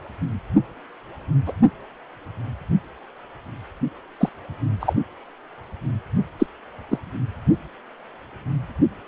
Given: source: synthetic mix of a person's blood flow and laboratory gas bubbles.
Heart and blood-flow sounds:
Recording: Doppler ultrasound of blood flow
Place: precordium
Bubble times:
1.45-1.52 s: bubbles
4.20-4.29 s: bubbles
4.80-4.93 s: bubbles
6.39-6.46 s: bubbles
6.91-6.98 s: bubbles
From the record:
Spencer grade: 2 (many but less than half of the cardiac periods contain bubble signals, singularly or in groups)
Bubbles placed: only in the low amplitude regions of the cardiac cycle

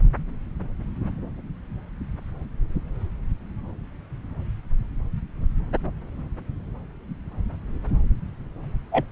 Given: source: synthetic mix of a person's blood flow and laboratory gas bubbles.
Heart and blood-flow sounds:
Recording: Doppler ultrasound of blood flow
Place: subclavian vein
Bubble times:
8.91-9.04 s: bubbles
From the record:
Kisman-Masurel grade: 113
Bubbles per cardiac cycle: 1 to 2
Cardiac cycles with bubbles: 1 to 10%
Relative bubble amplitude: loud (0.450 to 0.775)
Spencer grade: 1 (occasional bubble signal discernible with the cardiac motion signal, with majority of cardiac periods free of bubbles)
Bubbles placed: anywhere in the cardiac cycle

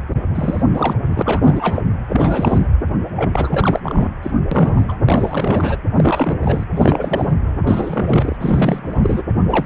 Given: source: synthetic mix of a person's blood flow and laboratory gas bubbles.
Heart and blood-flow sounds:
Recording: Doppler ultrasound of blood flow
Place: precordium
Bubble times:
0.34-0.63 s: bubbles
0.73-0.96 s: bubbles
1.10-1.83 s: bubbles
2.09-2.69 s: bubbles
3.16-3.79 s: bubbles
3.83-4.09 s: bubbles
4.23-4.30 s: bubbles
4.51-4.98 s: bubbles
5.05-5.76 s: bubbles
5.96-6.38 s: bubbles
6.42-6.63 s: bubbles
6.75-7.32 s: bubbles
7.66-8.38 s: bubbles
8.40-9.22 s: bubbles
9.47-9.66 s: bubbles
From the record:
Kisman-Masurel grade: 333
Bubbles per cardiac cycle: rolling drumbeat, 9 or more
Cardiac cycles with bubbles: 50 to 99%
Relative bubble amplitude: loud (0.450 to 0.775)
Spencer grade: 3 (all of the cardiac periods contain showers or single bubble signals, but not dominating or overriding the cardiac motion signals)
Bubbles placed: anywhere in the cardiac cycle

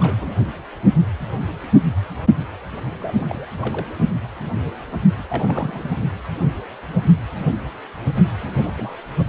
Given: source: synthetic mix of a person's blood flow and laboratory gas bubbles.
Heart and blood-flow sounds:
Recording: Doppler ultrasound of blood flow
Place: precordium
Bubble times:
0.00-0.36 s: bubbles
3.00-3.47 s: bubbles
3.59-3.88 s: bubbles
5.17-5.24 s: bubbles
5.29-5.91 s: bubbles
8.47-8.62 s: bubbles
8.64-8.97 s: bubbles
From the record:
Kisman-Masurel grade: 221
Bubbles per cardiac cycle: several, 3 to 8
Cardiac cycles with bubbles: 10 to 50%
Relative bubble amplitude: barely perceptible (0.100 to 0.250)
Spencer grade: 2 (many but less than half of the cardiac periods contain bubble signals, singularly or in groups)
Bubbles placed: only in the low amplitude regions of the cardiac cycle

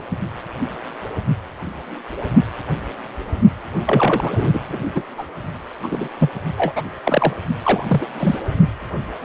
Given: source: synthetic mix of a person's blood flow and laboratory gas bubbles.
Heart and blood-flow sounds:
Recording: Doppler ultrasound of blood flow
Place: precordium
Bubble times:
0.00-0.03 s: bubbles
3.86-4.59 s: bubbles
4.68-4.79 s: bubbles
4.95-5.03 s: bubbles
5.18-5.24 s: bubbles
5.83-6.08 s: bubbles
6.19-6.29 s: bubbles
6.57-6.72 s: bubbles
6.75-6.83 s: bubbles
7.04-7.33 s: bubbles
7.64-7.84 s: bubbles
7.88-8.06 s: bubbles
8.19-8.38 s: bubbles
From the record:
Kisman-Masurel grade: 223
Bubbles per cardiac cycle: several, 3 to 8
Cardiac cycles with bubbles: 10 to 50%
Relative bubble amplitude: loud (0.450 to 0.775)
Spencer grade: 2 (many but less than half of the cardiac periods contain bubble signals, singularly or in groups)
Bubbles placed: only in the low amplitude regions of the cardiac cycle

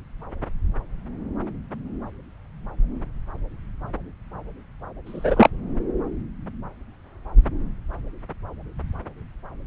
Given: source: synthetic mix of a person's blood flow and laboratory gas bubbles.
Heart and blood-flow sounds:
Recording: Doppler ultrasound of blood flow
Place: subclavian vein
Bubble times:
5.06-5.50 s: bubbles
From the record:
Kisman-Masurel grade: 113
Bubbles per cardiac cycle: 1 to 2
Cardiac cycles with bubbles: 1 to 10%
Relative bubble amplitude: loud (0.450 to 0.775)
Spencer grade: 1 (occasional bubble signal discernible with the cardiac motion signal, with majority of cardiac periods free of bubbles)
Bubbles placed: anywhere in the cardiac cycle

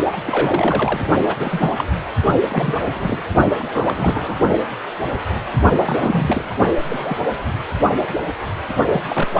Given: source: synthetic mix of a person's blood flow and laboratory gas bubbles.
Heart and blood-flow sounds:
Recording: Doppler ultrasound of blood flow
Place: precordium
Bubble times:
0.12-0.17 s: bubbles
0.26-1.07 s: bubbles
1.27-1.36 s: bubbles
1.39-1.71 s: bubbles
1.77-1.84 s: bubbles
2.50-3.19 s: bubbles
3.58-4.37 s: bubbles
5.76-6.71 s: bubbles
6.82-7.18 s: bubbles
8.91-9.01 s: bubbles
9.09-9.29 s: bubbles
9.34-9.40 s: bubbles
From the record:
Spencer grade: 3 (all of the cardiac periods contain showers or single bubble signals, but not dominating or overriding the cardiac motion signals)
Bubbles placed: only in the low amplitude regions of the cardiac cycle

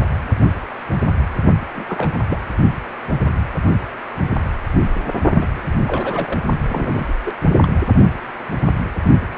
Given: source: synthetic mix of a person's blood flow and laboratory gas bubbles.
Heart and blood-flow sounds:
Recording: Doppler ultrasound of blood flow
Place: precordium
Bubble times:
1.76-1.84 s: bubbles
1.88-2.38 s: bubbles
5.29-5.63 s: bubbles
5.87-6.41 s: bubbles
6.69-7.15 s: bubbles
7.25-7.33 s: bubbles
7.61-7.79 s: bubbles
From the record:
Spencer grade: 2 (many but less than half of the cardiac periods contain bubble signals, singularly or in groups)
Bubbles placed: only in the low amplitude regions of the cardiac cycle

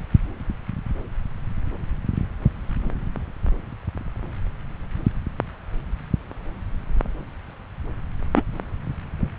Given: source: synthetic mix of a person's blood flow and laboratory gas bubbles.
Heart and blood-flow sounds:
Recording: Doppler ultrasound of blood flow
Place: subclavian vein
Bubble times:
8.35-8.43 s: bubbles
From the record:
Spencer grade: 1 (occasional bubble signal discernible with the cardiac motion signal, with majority of cardiac periods free of bubbles)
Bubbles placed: anywhere in the cardiac cycle

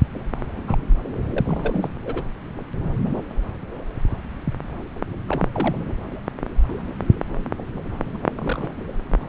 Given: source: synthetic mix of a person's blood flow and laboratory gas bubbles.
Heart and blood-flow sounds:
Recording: Doppler ultrasound of blood flow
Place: subclavian vein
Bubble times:
0.51-0.77 s: bubbles
1.29-1.89 s: bubbles
2.04-2.24 s: bubbles
5.29-5.48 s: bubbles
5.52-5.75 s: bubbles
8.14-8.26 s: bubbles
8.35-8.69 s: bubbles
From the record:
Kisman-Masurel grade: 221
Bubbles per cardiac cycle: several, 3 to 8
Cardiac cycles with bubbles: 10 to 50%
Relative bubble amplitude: barely perceptible (0.100 to 0.250)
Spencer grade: 2 (many but less than half of the cardiac periods contain bubble signals, singularly or in groups)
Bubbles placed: anywhere in the cardiac cycle

